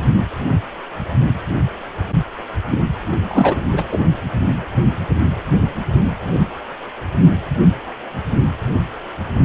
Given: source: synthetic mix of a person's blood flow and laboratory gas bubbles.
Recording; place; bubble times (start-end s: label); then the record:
Doppler ultrasound of blood flow; precordium
2.67-2.81 s: bubbles
3.23-3.56 s: bubbles
3.73-3.83 s: bubbles
3.92-3.99 s: bubbles
From the record:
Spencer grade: 1 (occasional bubble signal discernible with the cardiac motion signal, with majority of cardiac periods free of bubbles); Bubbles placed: anywhere in the cardiac cycle